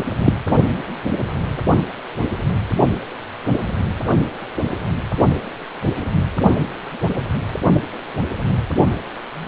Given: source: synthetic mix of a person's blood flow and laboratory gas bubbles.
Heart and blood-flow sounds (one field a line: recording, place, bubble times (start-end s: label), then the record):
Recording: Doppler ultrasound of blood flow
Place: precordium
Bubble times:
0.20-0.34 s: bubbles
From the record:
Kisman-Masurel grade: 113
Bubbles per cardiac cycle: 1 to 2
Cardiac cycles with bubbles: 1 to 10%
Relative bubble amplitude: loud (0.450 to 0.775)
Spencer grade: 1 (occasional bubble signal discernible with the cardiac motion signal, with majority of cardiac periods free of bubbles)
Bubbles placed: only in the low amplitude regions of the cardiac cycle